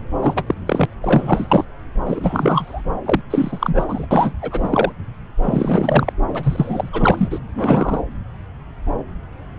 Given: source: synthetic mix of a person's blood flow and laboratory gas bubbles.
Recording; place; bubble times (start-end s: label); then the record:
Doppler ultrasound of blood flow; subclavian vein
0.20-0.54 s: bubbles
0.67-0.85 s: bubbles
1.02-1.65 s: bubbles
2.06-2.82 s: bubbles
3.05-3.22 s: bubbles
3.30-3.84 s: bubbles
3.88-4.06 s: bubbles
4.11-4.32 s: bubbles
4.42-4.92 s: bubbles
5.42-6.13 s: bubbles
6.34-6.89 s: bubbles
6.92-7.40 s: bubbles
7.55-8.02 s: bubbles
From the record:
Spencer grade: 3 (all of the cardiac periods contain showers or single bubble signals, but not dominating or overriding the cardiac motion signals); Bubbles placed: anywhere in the cardiac cycle